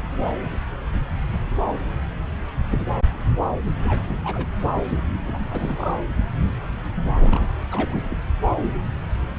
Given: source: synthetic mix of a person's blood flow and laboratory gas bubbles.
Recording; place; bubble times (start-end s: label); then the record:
Doppler ultrasound of blood flow; subclavian vein
3.84-4.04 s: bubbles
4.08-4.47 s: bubbles
5.28-5.38 s: bubbles
5.50-5.94 s: bubbles
7.21-7.54 s: bubbles
7.71-8.20 s: bubbles
From the record:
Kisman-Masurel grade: 221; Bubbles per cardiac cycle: several, 3 to 8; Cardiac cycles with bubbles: 10 to 50%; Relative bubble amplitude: barely perceptible (0.100 to 0.250); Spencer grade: 2 (many but less than half of the cardiac periods contain bubble signals, singularly or in groups); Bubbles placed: anywhere in the cardiac cycle